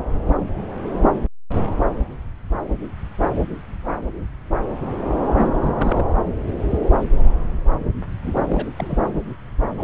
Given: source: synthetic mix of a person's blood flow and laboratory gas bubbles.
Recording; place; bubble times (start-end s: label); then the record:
Doppler ultrasound of blood flow; subclavian vein
5.36-5.50 s: bubbles
5.59-6.04 s: bubbles
8.24-8.65 s: bubbles
8.77-8.97 s: bubbles
9.78-9.83 s: bubbles
From the record:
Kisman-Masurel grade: 221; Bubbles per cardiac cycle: several, 3 to 8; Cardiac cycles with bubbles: 10 to 50%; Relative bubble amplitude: barely perceptible (0.100 to 0.250); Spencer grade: 2 (many but less than half of the cardiac periods contain bubble signals, singularly or in groups); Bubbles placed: anywhere in the cardiac cycle